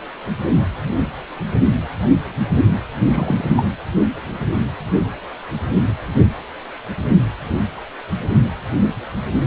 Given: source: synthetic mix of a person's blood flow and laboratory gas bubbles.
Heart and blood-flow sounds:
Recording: Doppler ultrasound of blood flow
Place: precordium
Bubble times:
3.10-3.45 s: bubbles
3.56-3.64 s: bubbles
From the record:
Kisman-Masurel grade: 212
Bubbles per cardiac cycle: several, 3 to 8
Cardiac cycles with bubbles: 1 to 10%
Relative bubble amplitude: moderate (0.250 to 0.450)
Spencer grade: 1 (occasional bubble signal discernible with the cardiac motion signal, with majority of cardiac periods free of bubbles)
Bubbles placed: anywhere in the cardiac cycle

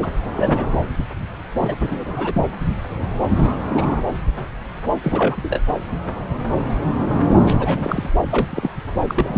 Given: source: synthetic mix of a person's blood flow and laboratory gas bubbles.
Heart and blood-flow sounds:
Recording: Doppler ultrasound of blood flow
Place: subclavian vein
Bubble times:
0.02-0.08 s: bubbles
0.35-0.68 s: bubbles
1.57-1.75 s: bubbles
1.81-2.45 s: bubbles
3.36-3.59 s: bubbles
3.68-4.02 s: bubbles
5.03-5.59 s: bubbles
7.46-8.11 s: bubbles
8.31-8.46 s: bubbles
8.49-8.71 s: bubbles
9.08-9.38 s: bubbles
From the record:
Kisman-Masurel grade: 232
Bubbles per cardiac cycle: several, 3 to 8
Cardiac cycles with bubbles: 50 to 99%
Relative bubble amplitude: moderate (0.250 to 0.450)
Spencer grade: 3 (all of the cardiac periods contain showers or single bubble signals, but not dominating or overriding the cardiac motion signals)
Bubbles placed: anywhere in the cardiac cycle

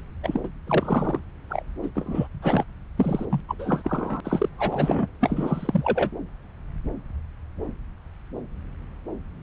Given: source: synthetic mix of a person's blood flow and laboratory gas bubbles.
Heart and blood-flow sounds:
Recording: Doppler ultrasound of blood flow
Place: subclavian vein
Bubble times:
0.22-0.40 s: bubbles
0.43-0.48 s: bubbles
0.67-1.20 s: bubbles
1.50-1.62 s: bubbles
1.82-1.89 s: bubbles
1.95-2.27 s: bubbles
2.42-2.64 s: bubbles
2.97-3.25 s: bubbles
3.30-3.40 s: bubbles
3.48-3.55 s: bubbles
3.59-4.21 s: bubbles
4.24-4.49 s: bubbles
4.58-5.08 s: bubbles
5.21-6.10 s: bubbles
From the record:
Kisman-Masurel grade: 332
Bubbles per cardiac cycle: rolling drumbeat, 9 or more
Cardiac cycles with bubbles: 50 to 99%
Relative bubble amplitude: moderate (0.250 to 0.450)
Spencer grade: 3 (all of the cardiac periods contain showers or single bubble signals, but not dominating or overriding the cardiac motion signals)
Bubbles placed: anywhere in the cardiac cycle

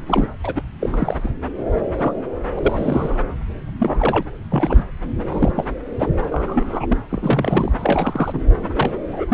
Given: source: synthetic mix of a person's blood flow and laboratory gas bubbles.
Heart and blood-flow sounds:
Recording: Doppler ultrasound of blood flow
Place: subclavian vein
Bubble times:
0.06-0.30 s: bubbles
0.44-0.62 s: bubbles
0.80-1.31 s: bubbles
1.98-2.13 s: bubbles
2.56-3.19 s: bubbles
3.79-4.23 s: bubbles
4.51-4.84 s: bubbles
5.24-5.65 s: bubbles
5.99-6.10 s: bubbles
6.21-6.25 s: bubbles
6.32-6.98 s: bubbles
7.09-7.72 s: bubbles
7.78-8.41 s: bubbles
8.76-8.91 s: bubbles
9.08-9.25 s: bubbles
9.28-9.34 s: bubbles
From the record:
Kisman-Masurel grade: 242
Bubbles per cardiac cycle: several, 3 to 8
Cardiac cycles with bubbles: 100%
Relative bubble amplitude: moderate (0.250 to 0.450)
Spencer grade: 3 (all of the cardiac periods contain showers or single bubble signals, but not dominating or overriding the cardiac motion signals)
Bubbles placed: anywhere in the cardiac cycle

